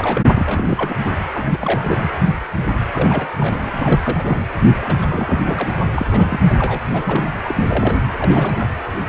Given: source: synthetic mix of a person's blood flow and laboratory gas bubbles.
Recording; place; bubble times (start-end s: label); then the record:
Doppler ultrasound of blood flow; precordium
0.00-0.22 s: bubbles
0.24-0.30 s: bubbles
0.36-1.05 s: bubbles
1.34-2.10 s: bubbles
2.93-3.33 s: bubbles
3.37-4.46 s: bubbles
4.81-5.80 s: bubbles
5.92-6.39 s: bubbles
6.58-6.80 s: bubbles
6.91-7.29 s: bubbles
7.44-7.64 s: bubbles
7.67-8.00 s: bubbles
8.10-8.70 s: bubbles
From the record:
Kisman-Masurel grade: 332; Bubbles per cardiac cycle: rolling drumbeat, 9 or more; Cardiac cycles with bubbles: 50 to 99%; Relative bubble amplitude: moderate (0.250 to 0.450); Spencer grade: 3 (all of the cardiac periods contain showers or single bubble signals, but not dominating or overriding the cardiac motion signals); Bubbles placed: anywhere in the cardiac cycle